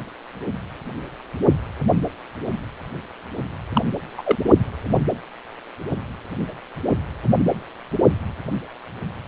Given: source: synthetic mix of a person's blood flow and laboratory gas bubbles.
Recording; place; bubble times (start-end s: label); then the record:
Doppler ultrasound of blood flow; precordium
3.74-3.81 s: bubbles
4.17-4.22 s: bubbles
4.25-4.36 s: bubbles
From the record:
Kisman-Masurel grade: 213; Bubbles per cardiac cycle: several, 3 to 8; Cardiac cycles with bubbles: 1 to 10%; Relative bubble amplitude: loud (0.450 to 0.775); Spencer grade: 1 (occasional bubble signal discernible with the cardiac motion signal, with majority of cardiac periods free of bubbles); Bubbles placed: anywhere in the cardiac cycle